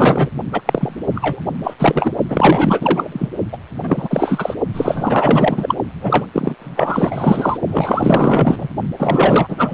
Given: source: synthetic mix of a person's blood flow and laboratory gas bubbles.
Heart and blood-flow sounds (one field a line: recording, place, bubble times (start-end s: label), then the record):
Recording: Doppler ultrasound of blood flow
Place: precordium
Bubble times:
0.00-0.30 s: bubbles
0.52-0.61 s: bubbles
0.65-0.96 s: bubbles
1.15-1.41 s: bubbles
1.63-1.74 s: bubbles
1.79-2.13 s: bubbles
2.29-3.08 s: bubbles
3.12-3.28 s: bubbles
3.52-3.58 s: bubbles
3.83-4.54 s: bubbles
4.73-5.75 s: bubbles
6.01-6.26 s: bubbles
6.33-6.55 s: bubbles
6.59-7.58 s: bubbles
7.68-8.68 s: bubbles
8.99-9.73 s: bubbles
From the record:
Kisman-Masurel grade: 444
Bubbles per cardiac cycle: continuous sound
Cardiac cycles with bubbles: 100%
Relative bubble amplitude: maximal (0.775 to 0.999)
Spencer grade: 4 (maximum detectable bubble signal sounding continuously throughout systole and diastole of every cardiac period, and overriding the amplitude of the normal cardiac signals)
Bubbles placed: only in the low amplitude regions of the cardiac cycle